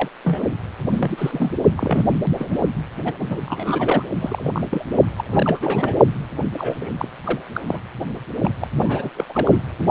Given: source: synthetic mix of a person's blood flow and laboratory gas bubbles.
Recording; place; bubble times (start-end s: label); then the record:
Doppler ultrasound of blood flow; precordium
0.00-0.09 s: bubbles
0.25-0.46 s: bubbles
0.91-1.52 s: bubbles
1.76-2.10 s: bubbles
2.35-2.66 s: bubbles
3.05-3.14 s: bubbles
3.17-3.40 s: bubbles
3.45-4.03 s: bubbles
4.19-4.61 s: bubbles
4.70-4.85 s: bubbles
4.92-4.98 s: bubbles
5.17-5.22 s: bubbles
5.25-6.00 s: bubbles
6.53-6.77 s: bubbles
6.80-6.89 s: bubbles
6.98-7.08 s: bubbles
7.24-7.39 s: bubbles
7.53-7.62 s: bubbles
7.67-7.79 s: bubbles
8.41-8.51 s: bubbles
8.60-8.68 s: bubbles
8.76-9.10 s: bubbles
9.15-9.25 s: bubbles
9.29-9.62 s: bubbles
9.79-9.91 s: bubbles
From the record:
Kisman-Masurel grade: 342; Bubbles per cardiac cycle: rolling drumbeat, 9 or more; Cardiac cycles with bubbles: 100%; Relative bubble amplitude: moderate (0.250 to 0.450); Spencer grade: 3 (all of the cardiac periods contain showers or single bubble signals, but not dominating or overriding the cardiac motion signals); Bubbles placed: anywhere in the cardiac cycle